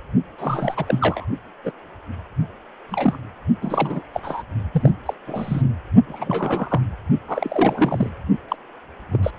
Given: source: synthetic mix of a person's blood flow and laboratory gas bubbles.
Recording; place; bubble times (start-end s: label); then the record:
Doppler ultrasound of blood flow; precordium
0.38-1.25 s: bubbles
1.64-1.71 s: bubbles
2.89-3.17 s: bubbles
3.62-4.02 s: bubbles
4.13-4.20 s: bubbles
4.23-4.42 s: bubbles
4.72-4.92 s: bubbles
5.05-5.14 s: bubbles
5.27-5.62 s: bubbles
6.06-6.81 s: bubbles
7.27-8.10 s: bubbles
8.48-8.56 s: bubbles
9.11-9.19 s: bubbles
9.22-9.30 s: bubbles
From the record:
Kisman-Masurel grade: 242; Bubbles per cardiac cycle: several, 3 to 8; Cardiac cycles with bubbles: 100%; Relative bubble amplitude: moderate (0.250 to 0.450); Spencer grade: 3 (all of the cardiac periods contain showers or single bubble signals, but not dominating or overriding the cardiac motion signals); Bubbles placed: only in the low amplitude regions of the cardiac cycle